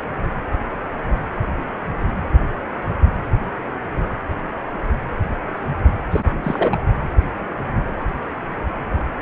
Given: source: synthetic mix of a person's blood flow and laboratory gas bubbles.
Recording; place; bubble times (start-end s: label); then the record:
Doppler ultrasound of blood flow; precordium
6.11-6.21 s: bubbles
6.43-6.78 s: bubbles
From the record:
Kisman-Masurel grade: 212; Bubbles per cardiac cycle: several, 3 to 8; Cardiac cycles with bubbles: 1 to 10%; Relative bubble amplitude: moderate (0.250 to 0.450); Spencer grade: 1 (occasional bubble signal discernible with the cardiac motion signal, with majority of cardiac periods free of bubbles); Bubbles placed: anywhere in the cardiac cycle